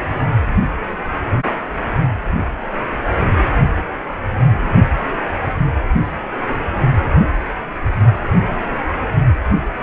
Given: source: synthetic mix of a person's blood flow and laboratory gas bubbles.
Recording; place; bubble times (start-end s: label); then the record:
Doppler ultrasound of blood flow; precordium
no bubbles
From the record:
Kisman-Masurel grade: 000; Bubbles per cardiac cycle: 0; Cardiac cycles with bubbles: 0%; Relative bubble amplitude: no bubbles discernible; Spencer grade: 0 (complete lack of bubble signals)